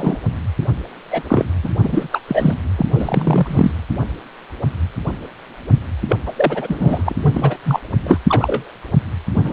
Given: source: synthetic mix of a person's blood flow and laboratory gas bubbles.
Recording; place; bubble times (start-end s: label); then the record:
Doppler ultrasound of blood flow; precordium
0.00-0.17 s: bubbles
1.11-1.24 s: bubbles
1.29-1.45 s: bubbles
1.63-1.70 s: bubbles
1.83-2.07 s: bubbles
2.11-2.19 s: bubbles
2.27-2.54 s: bubbles
2.75-2.86 s: bubbles
2.94-3.71 s: bubbles
6.08-6.17 s: bubbles
6.26-6.33 s: bubbles
6.36-7.16 s: bubbles
7.22-7.57 s: bubbles
7.64-7.79 s: bubbles
8.03-8.19 s: bubbles
8.29-8.71 s: bubbles
9.34-9.52 s: bubbles
From the record:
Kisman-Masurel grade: 233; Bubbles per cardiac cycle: several, 3 to 8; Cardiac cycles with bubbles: 50 to 99%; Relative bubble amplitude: loud (0.450 to 0.775); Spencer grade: 3 (all of the cardiac periods contain showers or single bubble signals, but not dominating or overriding the cardiac motion signals); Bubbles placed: anywhere in the cardiac cycle